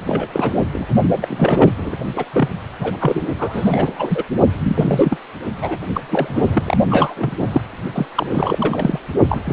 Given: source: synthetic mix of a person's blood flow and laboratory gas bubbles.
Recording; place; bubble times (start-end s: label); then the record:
Doppler ultrasound of blood flow; precordium
0.00-0.28 s: bubbles
0.32-0.59 s: bubbles
0.73-0.86 s: bubbles
1.21-1.72 s: bubbles
1.77-1.97 s: bubbles
2.16-2.25 s: bubbles
2.33-2.49 s: bubbles
2.79-3.25 s: bubbles
3.39-4.24 s: bubbles
4.63-5.17 s: bubbles
5.62-5.77 s: bubbles
5.95-6.00 s: bubbles
6.11-6.78 s: bubbles
6.90-7.62 s: bubbles
7.92-8.06 s: bubbles
8.15-8.98 s: bubbles
9.29-9.53 s: bubbles
From the record:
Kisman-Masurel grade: 342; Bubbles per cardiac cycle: rolling drumbeat, 9 or more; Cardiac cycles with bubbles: 100%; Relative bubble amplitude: moderate (0.250 to 0.450); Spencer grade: 3 (all of the cardiac periods contain showers or single bubble signals, but not dominating or overriding the cardiac motion signals); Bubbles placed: only in the low amplitude regions of the cardiac cycle